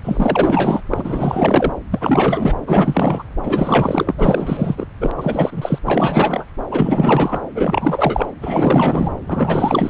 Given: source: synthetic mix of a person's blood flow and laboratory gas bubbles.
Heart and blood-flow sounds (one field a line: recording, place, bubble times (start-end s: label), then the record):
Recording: Doppler ultrasound of blood flow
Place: subclavian vein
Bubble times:
0.03-0.81 s: bubbles
0.90-1.74 s: bubbles
1.90-2.56 s: bubbles
2.67-3.24 s: bubbles
3.43-4.15 s: bubbles
4.17-4.87 s: bubbles
5.00-5.10 s: bubbles
5.17-5.79 s: bubbles
5.85-6.45 s: bubbles
6.71-7.40 s: bubbles
7.54-8.27 s: bubbles
8.42-9.10 s: bubbles
9.27-9.90 s: bubbles
From the record:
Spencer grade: 4 (maximum detectable bubble signal sounding continuously throughout systole and diastole of every cardiac period, and overriding the amplitude of the normal cardiac signals)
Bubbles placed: anywhere in the cardiac cycle